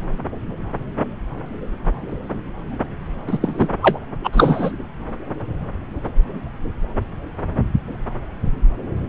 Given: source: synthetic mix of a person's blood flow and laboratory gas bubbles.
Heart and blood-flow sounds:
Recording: Doppler ultrasound of blood flow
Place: subclavian vein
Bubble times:
3.26-3.38 s: bubbles
3.41-3.67 s: bubbles
3.82-3.99 s: bubbles
4.24-4.71 s: bubbles
From the record:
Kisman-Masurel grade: 213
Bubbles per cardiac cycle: several, 3 to 8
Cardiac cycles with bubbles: 1 to 10%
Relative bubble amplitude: loud (0.450 to 0.775)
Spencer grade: 1 (occasional bubble signal discernible with the cardiac motion signal, with majority of cardiac periods free of bubbles)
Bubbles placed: anywhere in the cardiac cycle

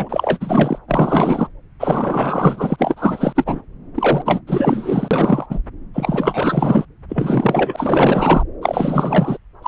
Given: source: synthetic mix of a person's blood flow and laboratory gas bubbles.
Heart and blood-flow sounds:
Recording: Doppler ultrasound of blood flow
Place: subclavian vein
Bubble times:
0.00-0.79 s: bubbles
0.88-1.48 s: bubbles
1.79-3.33 s: bubbles
3.35-3.63 s: bubbles
3.95-4.41 s: bubbles
4.47-5.46 s: bubbles
5.50-5.59 s: bubbles
5.93-6.85 s: bubbles
7.08-8.44 s: bubbles
8.62-9.38 s: bubbles
9.62-9.68 s: bubbles
From the record:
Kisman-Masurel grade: 444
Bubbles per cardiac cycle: continuous sound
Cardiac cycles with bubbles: 100%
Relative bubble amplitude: maximal (0.775 to 0.999)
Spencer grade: 4 (maximum detectable bubble signal sounding continuously throughout systole and diastole of every cardiac period, and overriding the amplitude of the normal cardiac signals)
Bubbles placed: anywhere in the cardiac cycle

